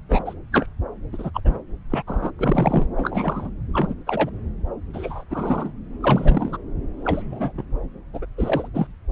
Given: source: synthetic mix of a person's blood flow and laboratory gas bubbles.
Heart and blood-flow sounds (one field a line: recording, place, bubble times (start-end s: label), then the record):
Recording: Doppler ultrasound of blood flow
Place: subclavian vein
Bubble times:
0.09-0.34 s: bubbles
0.52-0.67 s: bubbles
1.12-1.30 s: bubbles
1.34-1.40 s: bubbles
1.45-1.61 s: bubbles
1.90-2.03 s: bubbles
2.07-2.30 s: bubbles
2.38-2.87 s: bubbles
2.97-3.50 s: bubbles
3.72-3.94 s: bubbles
4.06-4.30 s: bubbles
4.93-5.23 s: bubbles
5.30-5.73 s: bubbles
6.00-6.57 s: bubbles
7.00-7.52 s: bubbles
7.57-7.63 s: bubbles
8.13-8.25 s: bubbles
8.38-8.67 s: bubbles
8.73-8.87 s: bubbles
From the record:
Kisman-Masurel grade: 242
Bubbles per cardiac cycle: several, 3 to 8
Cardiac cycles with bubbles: 100%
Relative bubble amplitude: moderate (0.250 to 0.450)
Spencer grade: 3 (all of the cardiac periods contain showers or single bubble signals, but not dominating or overriding the cardiac motion signals)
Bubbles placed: anywhere in the cardiac cycle